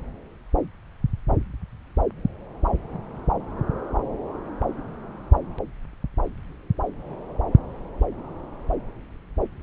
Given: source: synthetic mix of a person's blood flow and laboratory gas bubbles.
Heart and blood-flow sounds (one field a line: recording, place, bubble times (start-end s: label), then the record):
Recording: Doppler ultrasound of blood flow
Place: subclavian vein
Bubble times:
no bubbles
From the record:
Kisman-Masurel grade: 000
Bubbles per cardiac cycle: 0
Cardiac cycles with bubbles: 0%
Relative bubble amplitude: no bubbles discernible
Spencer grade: 0 (complete lack of bubble signals)